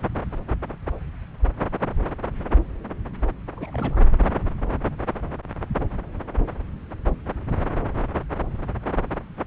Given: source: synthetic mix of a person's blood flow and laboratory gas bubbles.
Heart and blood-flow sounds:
Doppler ultrasound of blood flow; subclavian vein
3.56-3.97 s: bubbles
From the record:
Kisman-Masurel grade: 221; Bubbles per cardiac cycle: several, 3 to 8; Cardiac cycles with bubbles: 10 to 50%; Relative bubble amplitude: barely perceptible (0.100 to 0.250); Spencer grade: 2 (many but less than half of the cardiac periods contain bubble signals, singularly or in groups); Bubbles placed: anywhere in the cardiac cycle

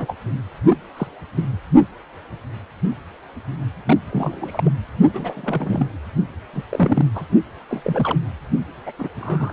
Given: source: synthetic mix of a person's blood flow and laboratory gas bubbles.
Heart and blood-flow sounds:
Doppler ultrasound of blood flow; precordium
0.00-0.15 s: bubbles
0.68-0.77 s: bubbles
0.97-1.07 s: bubbles
1.35-1.45 s: bubbles
3.86-3.97 s: bubbles
4.12-4.72 s: bubbles
5.13-5.88 s: bubbles
6.53-6.62 s: bubbles
6.69-7.06 s: bubbles
7.14-7.24 s: bubbles
7.69-8.19 s: bubbles
8.86-8.92 s: bubbles
8.99-9.09 s: bubbles
9.19-9.52 s: bubbles
From the record:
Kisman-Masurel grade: 232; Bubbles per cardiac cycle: several, 3 to 8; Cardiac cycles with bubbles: 50 to 99%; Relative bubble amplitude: moderate (0.250 to 0.450); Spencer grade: 3 (all of the cardiac periods contain showers or single bubble signals, but not dominating or overriding the cardiac motion signals); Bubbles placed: only in the low amplitude regions of the cardiac cycle

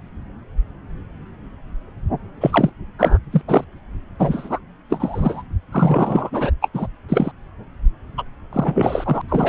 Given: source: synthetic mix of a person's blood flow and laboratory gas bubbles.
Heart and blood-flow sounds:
Doppler ultrasound of blood flow; subclavian vein
2.41-2.71 s: bubbles
2.99-3.18 s: bubbles
3.32-3.42 s: bubbles
3.47-3.64 s: bubbles
4.19-4.59 s: bubbles
4.89-5.42 s: bubbles
5.72-6.51 s: bubbles
6.62-6.69 s: bubbles
6.74-6.87 s: bubbles
7.08-7.32 s: bubbles
8.17-8.23 s: bubbles
8.52-9.21 s: bubbles
9.28-9.49 s: bubbles
From the record:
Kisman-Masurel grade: 233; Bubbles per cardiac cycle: several, 3 to 8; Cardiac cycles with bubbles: 50 to 99%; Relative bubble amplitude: loud (0.450 to 0.775); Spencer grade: 3 (all of the cardiac periods contain showers or single bubble signals, but not dominating or overriding the cardiac motion signals); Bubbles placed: anywhere in the cardiac cycle

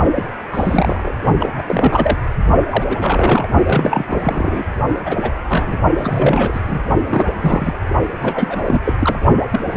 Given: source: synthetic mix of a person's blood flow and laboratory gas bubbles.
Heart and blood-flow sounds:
Doppler ultrasound of blood flow; precordium
0.16-0.25 s: bubbles
0.51-1.15 s: bubbles
1.40-1.52 s: bubbles
1.57-1.62 s: bubbles
1.67-2.19 s: bubbles
2.70-3.48 s: bubbles
3.66-4.65 s: bubbles
5.06-5.31 s: bubbles
5.49-5.78 s: bubbles
5.97-6.60 s: bubbles
6.67-6.79 s: bubbles
7.08-7.25 s: bubbles
7.38-7.74 s: bubbles
8.20-8.80 s: bubbles
8.85-8.93 s: bubbles
8.99-9.19 s: bubbles
9.50-9.60 s: bubbles
9.72-9.77 s: bubbles
From the record:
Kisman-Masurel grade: 342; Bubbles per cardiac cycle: rolling drumbeat, 9 or more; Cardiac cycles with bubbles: 100%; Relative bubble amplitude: moderate (0.250 to 0.450); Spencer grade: 3 (all of the cardiac periods contain showers or single bubble signals, but not dominating or overriding the cardiac motion signals); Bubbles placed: only in the low amplitude regions of the cardiac cycle

